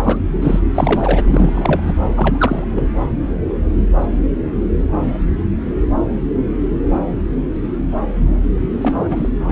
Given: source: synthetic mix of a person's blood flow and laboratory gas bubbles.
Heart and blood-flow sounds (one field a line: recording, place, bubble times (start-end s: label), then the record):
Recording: Doppler ultrasound of blood flow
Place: subclavian vein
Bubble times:
0.03-0.17 s: bubbles
0.42-0.60 s: bubbles
0.74-1.23 s: bubbles
1.27-1.93 s: bubbles
2.17-2.65 s: bubbles
2.75-2.82 s: bubbles
8.81-9.31 s: bubbles
9.39-9.52 s: bubbles
From the record:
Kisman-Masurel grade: 222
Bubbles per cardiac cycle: several, 3 to 8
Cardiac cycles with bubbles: 10 to 50%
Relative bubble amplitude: moderate (0.250 to 0.450)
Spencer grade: 2 (many but less than half of the cardiac periods contain bubble signals, singularly or in groups)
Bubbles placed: anywhere in the cardiac cycle